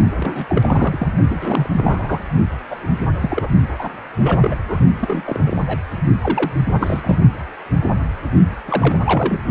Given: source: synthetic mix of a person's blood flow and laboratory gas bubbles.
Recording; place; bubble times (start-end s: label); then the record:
Doppler ultrasound of blood flow; precordium
0.14-0.46 s: bubbles
0.49-1.07 s: bubbles
1.30-1.69 s: bubbles
1.77-2.24 s: bubbles
2.70-2.92 s: bubbles
3.21-3.49 s: bubbles
3.78-3.90 s: bubbles
4.17-4.56 s: bubbles
4.67-4.79 s: bubbles
4.99-5.24 s: bubbles
5.26-5.79 s: bubbles
6.21-6.51 s: bubbles
6.80-7.20 s: bubbles
8.67-8.98 s: bubbles
9.04-9.40 s: bubbles
From the record:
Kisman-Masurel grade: 232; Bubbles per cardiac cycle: several, 3 to 8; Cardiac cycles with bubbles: 50 to 99%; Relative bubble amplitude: moderate (0.250 to 0.450); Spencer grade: 3 (all of the cardiac periods contain showers or single bubble signals, but not dominating or overriding the cardiac motion signals); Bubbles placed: only in the low amplitude regions of the cardiac cycle